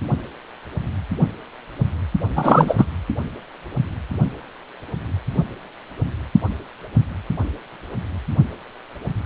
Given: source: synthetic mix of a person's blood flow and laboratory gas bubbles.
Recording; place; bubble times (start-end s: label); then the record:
Doppler ultrasound of blood flow; precordium
2.35-2.85 s: bubbles
From the record:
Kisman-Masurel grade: 213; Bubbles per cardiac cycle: several, 3 to 8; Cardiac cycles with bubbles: 1 to 10%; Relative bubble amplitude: loud (0.450 to 0.775); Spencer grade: 1 (occasional bubble signal discernible with the cardiac motion signal, with majority of cardiac periods free of bubbles); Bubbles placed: only in the low amplitude regions of the cardiac cycle